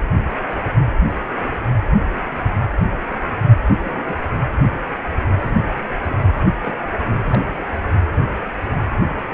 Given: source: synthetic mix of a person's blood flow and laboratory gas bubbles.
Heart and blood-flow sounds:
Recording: Doppler ultrasound of blood flow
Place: precordium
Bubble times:
3.83-4.13 s: bubbles
6.00-6.16 s: bubbles
6.62-6.81 s: bubbles
7.25-7.54 s: bubbles
From the record:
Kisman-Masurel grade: 121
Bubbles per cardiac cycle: 1 to 2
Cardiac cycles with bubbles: 10 to 50%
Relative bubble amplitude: barely perceptible (0.100 to 0.250)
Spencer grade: 2 (many but less than half of the cardiac periods contain bubble signals, singularly or in groups)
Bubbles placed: anywhere in the cardiac cycle

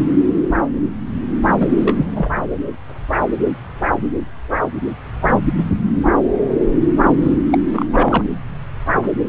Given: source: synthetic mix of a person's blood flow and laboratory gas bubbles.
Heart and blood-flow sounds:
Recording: Doppler ultrasound of blood flow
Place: subclavian vein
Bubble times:
1.59-1.69 s: bubbles
1.76-2.06 s: bubbles
2.15-2.29 s: bubbles
7.21-7.32 s: bubbles
7.50-7.58 s: bubbles
7.73-7.86 s: bubbles
7.93-8.25 s: bubbles
From the record:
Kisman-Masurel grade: 222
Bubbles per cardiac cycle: several, 3 to 8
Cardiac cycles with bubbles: 10 to 50%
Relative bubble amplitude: moderate (0.250 to 0.450)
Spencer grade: 2 (many but less than half of the cardiac periods contain bubble signals, singularly or in groups)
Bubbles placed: anywhere in the cardiac cycle

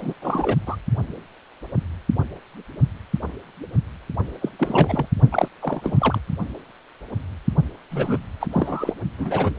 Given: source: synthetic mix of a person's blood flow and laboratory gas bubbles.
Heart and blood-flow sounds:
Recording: Doppler ultrasound of blood flow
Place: precordium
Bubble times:
0.00-0.14 s: bubbles
0.21-0.56 s: bubbles
0.66-0.76 s: bubbles
4.42-4.49 s: bubbles
4.59-5.06 s: bubbles
5.31-5.48 s: bubbles
5.61-6.20 s: bubbles
7.91-8.19 s: bubbles
8.40-8.47 s: bubbles
8.51-8.93 s: bubbles
9.18-9.51 s: bubbles
From the record:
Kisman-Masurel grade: 332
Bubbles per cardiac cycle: rolling drumbeat, 9 or more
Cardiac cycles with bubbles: 50 to 99%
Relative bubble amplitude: moderate (0.250 to 0.450)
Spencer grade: 3 (all of the cardiac periods contain showers or single bubble signals, but not dominating or overriding the cardiac motion signals)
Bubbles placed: only in the low amplitude regions of the cardiac cycle

